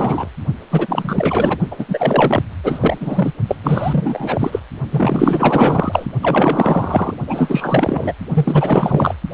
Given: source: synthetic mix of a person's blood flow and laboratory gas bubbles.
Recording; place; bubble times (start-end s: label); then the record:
Doppler ultrasound of blood flow; precordium
0.00-0.29 s: bubbles
0.71-1.58 s: bubbles
1.71-1.85 s: bubbles
1.89-2.43 s: bubbles
2.64-3.31 s: bubbles
3.48-3.55 s: bubbles
3.63-4.60 s: bubbles
4.91-6.07 s: bubbles
6.22-7.14 s: bubbles
7.28-8.14 s: bubbles
8.34-9.14 s: bubbles
9.31-9.34 s: bubbles
From the record:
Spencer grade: 4 (maximum detectable bubble signal sounding continuously throughout systole and diastole of every cardiac period, and overriding the amplitude of the normal cardiac signals); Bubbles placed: only in the low amplitude regions of the cardiac cycle